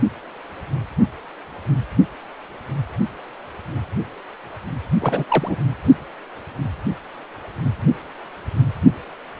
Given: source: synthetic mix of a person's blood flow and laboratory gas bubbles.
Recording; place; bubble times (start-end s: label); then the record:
Doppler ultrasound of blood flow; precordium
5.00-5.25 s: bubbles
5.29-5.56 s: bubbles
From the record:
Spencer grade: 1 (occasional bubble signal discernible with the cardiac motion signal, with majority of cardiac periods free of bubbles); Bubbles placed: anywhere in the cardiac cycle